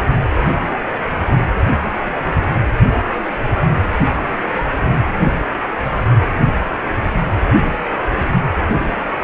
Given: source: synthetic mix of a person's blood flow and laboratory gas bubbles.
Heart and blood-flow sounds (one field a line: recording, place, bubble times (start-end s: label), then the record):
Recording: Doppler ultrasound of blood flow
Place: precordium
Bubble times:
no bubbles
From the record:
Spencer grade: 0 (complete lack of bubble signals)